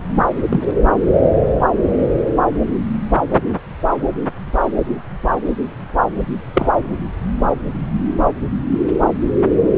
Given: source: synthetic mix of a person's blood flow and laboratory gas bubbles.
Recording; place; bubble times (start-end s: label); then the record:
Doppler ultrasound of blood flow; subclavian vein
0.49-0.60 s: bubbles
6.54-6.70 s: bubbles
From the record:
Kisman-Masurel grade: 123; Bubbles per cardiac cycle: 1 to 2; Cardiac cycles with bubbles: 10 to 50%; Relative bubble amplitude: loud (0.450 to 0.775); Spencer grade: 2 (many but less than half of the cardiac periods contain bubble signals, singularly or in groups); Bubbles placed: anywhere in the cardiac cycle